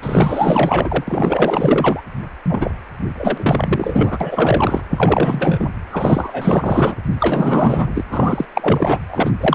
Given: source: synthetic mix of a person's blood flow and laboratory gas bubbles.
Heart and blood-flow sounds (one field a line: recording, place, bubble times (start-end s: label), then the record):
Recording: Doppler ultrasound of blood flow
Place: precordium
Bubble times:
0.01-1.04 s: bubbles
1.07-2.02 s: bubbles
2.49-2.71 s: bubbles
3.17-4.81 s: bubbles
4.91-5.67 s: bubbles
5.91-6.95 s: bubbles
7.20-7.92 s: bubbles
7.95-8.04 s: bubbles
8.11-8.46 s: bubbles
8.54-8.99 s: bubbles
9.10-9.31 s: bubbles
9.40-9.54 s: bubbles
From the record:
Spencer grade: 4 (maximum detectable bubble signal sounding continuously throughout systole and diastole of every cardiac period, and overriding the amplitude of the normal cardiac signals)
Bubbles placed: anywhere in the cardiac cycle